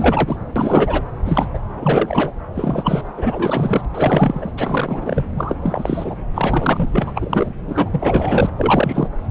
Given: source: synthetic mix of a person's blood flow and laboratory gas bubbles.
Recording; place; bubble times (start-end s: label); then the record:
Doppler ultrasound of blood flow; subclavian vein
0.00-0.36 s: bubbles
0.56-1.02 s: bubbles
1.25-1.46 s: bubbles
1.54-1.58 s: bubbles
1.79-2.32 s: bubbles
2.55-3.04 s: bubbles
3.18-3.85 s: bubbles
3.94-4.52 s: bubbles
4.57-5.24 s: bubbles
5.37-5.55 s: bubbles
5.62-6.15 s: bubbles
6.34-6.87 s: bubbles
6.92-7.54 s: bubbles
7.68-7.90 s: bubbles
7.92-8.49 s: bubbles
8.57-9.09 s: bubbles
From the record:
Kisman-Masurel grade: 342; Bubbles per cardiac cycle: rolling drumbeat, 9 or more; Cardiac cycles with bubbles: 100%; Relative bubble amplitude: moderate (0.250 to 0.450); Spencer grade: 3 (all of the cardiac periods contain showers or single bubble signals, but not dominating or overriding the cardiac motion signals); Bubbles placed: anywhere in the cardiac cycle